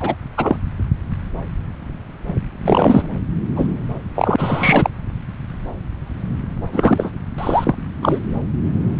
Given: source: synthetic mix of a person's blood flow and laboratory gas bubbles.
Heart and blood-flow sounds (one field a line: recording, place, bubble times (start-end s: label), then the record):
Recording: Doppler ultrasound of blood flow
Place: subclavian vein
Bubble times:
0.00-0.15 s: bubbles
0.37-0.57 s: bubbles
2.62-3.06 s: bubbles
3.56-3.67 s: bubbles
4.14-4.90 s: bubbles
6.72-7.10 s: bubbles
7.38-7.75 s: bubbles
8.01-8.19 s: bubbles
From the record:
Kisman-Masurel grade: 233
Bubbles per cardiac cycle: several, 3 to 8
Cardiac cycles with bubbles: 50 to 99%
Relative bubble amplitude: loud (0.450 to 0.775)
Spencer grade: 3 (all of the cardiac periods contain showers or single bubble signals, but not dominating or overriding the cardiac motion signals)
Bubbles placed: anywhere in the cardiac cycle